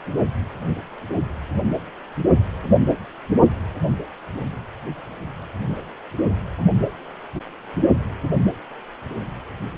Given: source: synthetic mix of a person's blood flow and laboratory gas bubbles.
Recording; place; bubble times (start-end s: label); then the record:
Doppler ultrasound of blood flow; precordium
no bubbles
From the record:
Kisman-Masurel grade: 000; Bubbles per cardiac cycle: 0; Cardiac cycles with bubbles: 0%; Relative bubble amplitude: no bubbles discernible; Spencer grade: 0 (complete lack of bubble signals)